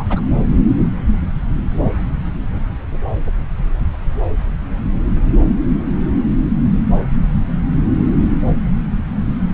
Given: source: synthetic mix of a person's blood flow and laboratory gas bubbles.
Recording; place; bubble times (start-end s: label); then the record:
Doppler ultrasound of blood flow; subclavian vein
0.00-0.05 s: bubbles
0.09-0.23 s: bubbles
From the record:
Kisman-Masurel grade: 222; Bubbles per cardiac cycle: several, 3 to 8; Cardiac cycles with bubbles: 10 to 50%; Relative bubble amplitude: moderate (0.250 to 0.450); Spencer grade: 2 (many but less than half of the cardiac periods contain bubble signals, singularly or in groups); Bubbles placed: anywhere in the cardiac cycle